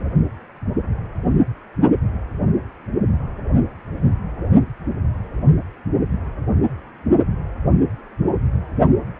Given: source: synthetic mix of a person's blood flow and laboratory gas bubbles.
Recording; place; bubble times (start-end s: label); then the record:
Doppler ultrasound of blood flow; precordium
no bubbles
From the record:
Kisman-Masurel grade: 000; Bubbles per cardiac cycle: 0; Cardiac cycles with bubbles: 0%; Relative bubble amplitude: no bubbles discernible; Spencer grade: 0 (complete lack of bubble signals)